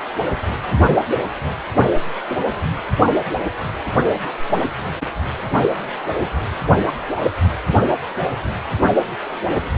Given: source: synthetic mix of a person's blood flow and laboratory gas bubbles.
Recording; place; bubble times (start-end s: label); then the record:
Doppler ultrasound of blood flow; precordium
0.51-0.74 s: bubbles
2.28-2.38 s: bubbles
From the record:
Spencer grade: 2 (many but less than half of the cardiac periods contain bubble signals, singularly or in groups); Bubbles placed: only in the low amplitude regions of the cardiac cycle